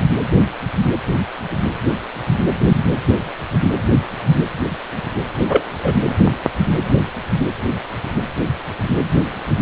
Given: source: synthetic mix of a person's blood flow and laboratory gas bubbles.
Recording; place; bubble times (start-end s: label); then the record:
Doppler ultrasound of blood flow; precordium
5.47-5.65 s: bubbles
5.82-5.95 s: bubbles
From the record:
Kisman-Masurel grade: 213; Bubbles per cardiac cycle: several, 3 to 8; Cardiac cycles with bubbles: 1 to 10%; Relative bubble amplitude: loud (0.450 to 0.775); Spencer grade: 1 (occasional bubble signal discernible with the cardiac motion signal, with majority of cardiac periods free of bubbles); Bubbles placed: anywhere in the cardiac cycle